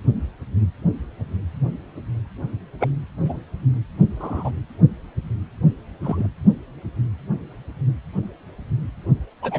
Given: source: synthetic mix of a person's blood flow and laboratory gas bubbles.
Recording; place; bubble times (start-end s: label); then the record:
Doppler ultrasound of blood flow; precordium
2.79-2.89 s: bubbles
3.24-3.41 s: bubbles
4.17-4.51 s: bubbles
6.03-6.28 s: bubbles
9.42-9.59 s: bubbles
From the record:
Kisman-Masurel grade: 122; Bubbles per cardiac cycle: 1 to 2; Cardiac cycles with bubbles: 10 to 50%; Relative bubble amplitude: moderate (0.250 to 0.450); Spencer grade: 2 (many but less than half of the cardiac periods contain bubble signals, singularly or in groups); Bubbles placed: anywhere in the cardiac cycle